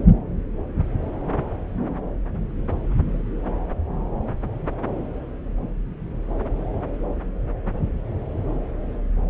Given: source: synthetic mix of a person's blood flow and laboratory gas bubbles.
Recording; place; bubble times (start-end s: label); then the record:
Doppler ultrasound of blood flow; subclavian vein
no bubbles
From the record:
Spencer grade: 0 (complete lack of bubble signals)